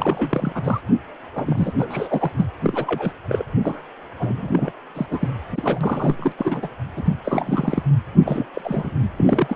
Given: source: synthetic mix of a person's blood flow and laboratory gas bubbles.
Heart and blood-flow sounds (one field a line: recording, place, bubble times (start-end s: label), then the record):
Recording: Doppler ultrasound of blood flow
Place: precordium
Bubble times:
0.00-0.52 s: bubbles
0.55-0.81 s: bubbles
1.35-2.31 s: bubbles
2.37-2.46 s: bubbles
2.62-3.12 s: bubbles
3.28-3.44 s: bubbles
3.62-3.83 s: bubbles
4.19-4.71 s: bubbles
4.95-5.06 s: bubbles
5.11-5.29 s: bubbles
5.55-6.32 s: bubbles
6.38-6.68 s: bubbles
6.96-7.13 s: bubbles
7.24-7.83 s: bubbles
8.25-8.48 s: bubbles
8.54-8.90 s: bubbles
9.18-9.56 s: bubbles
From the record:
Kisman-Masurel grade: 342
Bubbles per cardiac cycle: rolling drumbeat, 9 or more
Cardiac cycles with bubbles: 100%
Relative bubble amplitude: moderate (0.250 to 0.450)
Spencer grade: 3 (all of the cardiac periods contain showers or single bubble signals, but not dominating or overriding the cardiac motion signals)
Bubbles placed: anywhere in the cardiac cycle